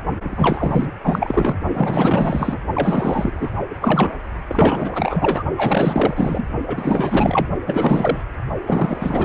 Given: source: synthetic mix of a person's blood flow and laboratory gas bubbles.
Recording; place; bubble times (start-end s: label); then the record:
Doppler ultrasound of blood flow; precordium
0.22-0.91 s: bubbles
1.03-1.58 s: bubbles
1.74-2.59 s: bubbles
2.74-3.58 s: bubbles
3.81-4.17 s: bubbles
4.48-5.44 s: bubbles
5.56-6.47 s: bubbles
6.67-7.48 s: bubbles
7.67-8.24 s: bubbles
8.65-9.25 s: bubbles
From the record:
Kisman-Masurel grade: 444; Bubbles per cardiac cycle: continuous sound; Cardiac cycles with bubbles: 100%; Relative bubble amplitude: maximal (0.775 to 0.999); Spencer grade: 4 (maximum detectable bubble signal sounding continuously throughout systole and diastole of every cardiac period, and overriding the amplitude of the normal cardiac signals); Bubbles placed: only in the low amplitude regions of the cardiac cycle